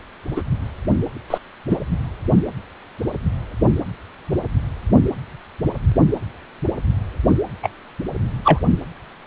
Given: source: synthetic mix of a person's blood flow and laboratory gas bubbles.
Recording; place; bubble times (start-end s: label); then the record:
Doppler ultrasound of blood flow; precordium
0.36-0.42 s: bubbles
1.30-1.38 s: bubbles
1.70-1.78 s: bubbles
7.62-7.69 s: bubbles
8.44-8.59 s: bubbles
From the record:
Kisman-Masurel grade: 123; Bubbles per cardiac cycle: 1 to 2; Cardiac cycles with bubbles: 10 to 50%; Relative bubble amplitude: loud (0.450 to 0.775); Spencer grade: 2 (many but less than half of the cardiac periods contain bubble signals, singularly or in groups); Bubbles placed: only in the low amplitude regions of the cardiac cycle